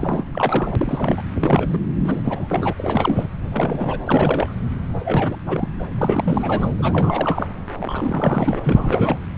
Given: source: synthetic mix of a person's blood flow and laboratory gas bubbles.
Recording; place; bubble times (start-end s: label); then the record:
Doppler ultrasound of blood flow; subclavian vein
0.00-0.25 s: bubbles
0.33-1.22 s: bubbles
1.40-1.78 s: bubbles
2.04-2.73 s: bubbles
2.78-3.28 s: bubbles
3.41-3.99 s: bubbles
4.05-4.53 s: bubbles
5.00-5.36 s: bubbles
5.46-5.69 s: bubbles
5.79-5.88 s: bubbles
5.91-6.69 s: bubbles
6.78-7.47 s: bubbles
7.79-8.59 s: bubbles
8.63-9.18 s: bubbles
From the record:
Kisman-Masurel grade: 332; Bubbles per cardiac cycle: rolling drumbeat, 9 or more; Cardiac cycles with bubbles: 50 to 99%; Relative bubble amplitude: moderate (0.250 to 0.450); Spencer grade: 3 (all of the cardiac periods contain showers or single bubble signals, but not dominating or overriding the cardiac motion signals); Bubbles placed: anywhere in the cardiac cycle